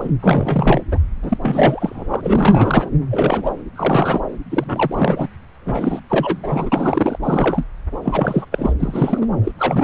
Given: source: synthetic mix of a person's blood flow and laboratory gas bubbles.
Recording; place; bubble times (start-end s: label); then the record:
Doppler ultrasound of blood flow; subclavian vein
0.00-0.10 s: bubbles
0.22-0.83 s: bubbles
0.91-0.98 s: bubbles
1.22-1.38 s: bubbles
1.42-2.90 s: bubbles
3.10-3.52 s: bubbles
3.76-4.21 s: bubbles
4.50-5.27 s: bubbles
5.65-6.00 s: bubbles
6.09-7.17 s: bubbles
7.23-7.65 s: bubbles
8.03-8.45 s: bubbles
8.52-8.73 s: bubbles
8.79-9.27 s: bubbles
9.44-9.52 s: bubbles
9.59-9.83 s: bubbles
From the record:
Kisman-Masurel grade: 343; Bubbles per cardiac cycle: rolling drumbeat, 9 or more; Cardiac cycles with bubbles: 100%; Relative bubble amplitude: loud (0.450 to 0.775); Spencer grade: 3 (all of the cardiac periods contain showers or single bubble signals, but not dominating or overriding the cardiac motion signals); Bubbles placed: anywhere in the cardiac cycle